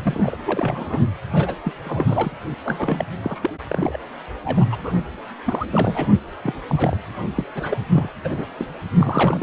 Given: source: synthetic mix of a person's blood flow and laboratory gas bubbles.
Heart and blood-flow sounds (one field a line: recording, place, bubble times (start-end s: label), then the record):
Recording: Doppler ultrasound of blood flow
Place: precordium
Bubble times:
0.02-0.38 s: bubbles
0.46-1.02 s: bubbles
1.31-1.55 s: bubbles
1.65-1.73 s: bubbles
1.84-2.31 s: bubbles
2.64-3.05 s: bubbles
3.22-3.50 s: bubbles
3.69-3.98 s: bubbles
4.45-4.65 s: bubbles
4.70-4.94 s: bubbles
5.46-5.66 s: bubbles
5.71-6.12 s: bubbles
6.43-6.55 s: bubbles
6.69-6.97 s: bubbles
7.35-7.44 s: bubbles
7.56-7.77 s: bubbles
7.92-8.09 s: bubbles
8.24-8.46 s: bubbles
8.57-8.66 s: bubbles
8.98-9.43 s: bubbles
From the record:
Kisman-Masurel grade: 342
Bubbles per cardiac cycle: rolling drumbeat, 9 or more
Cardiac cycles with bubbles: 100%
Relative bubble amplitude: moderate (0.250 to 0.450)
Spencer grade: 3 (all of the cardiac periods contain showers or single bubble signals, but not dominating or overriding the cardiac motion signals)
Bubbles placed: anywhere in the cardiac cycle